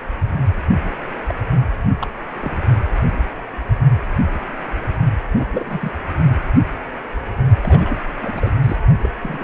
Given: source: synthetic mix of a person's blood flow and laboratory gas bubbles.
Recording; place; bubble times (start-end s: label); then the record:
Doppler ultrasound of blood flow; precordium
1.28-1.34 s: bubbles
2.01-2.06 s: bubbles
2.40-2.57 s: bubbles
5.38-5.45 s: bubbles
5.53-5.92 s: bubbles
7.63-7.99 s: bubbles
8.22-8.50 s: bubbles
8.63-8.76 s: bubbles
9.02-9.09 s: bubbles
9.22-9.44 s: bubbles
From the record:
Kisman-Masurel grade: 221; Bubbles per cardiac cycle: several, 3 to 8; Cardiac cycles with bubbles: 10 to 50%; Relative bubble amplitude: barely perceptible (0.100 to 0.250); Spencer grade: 2 (many but less than half of the cardiac periods contain bubble signals, singularly or in groups); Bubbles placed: only in the low amplitude regions of the cardiac cycle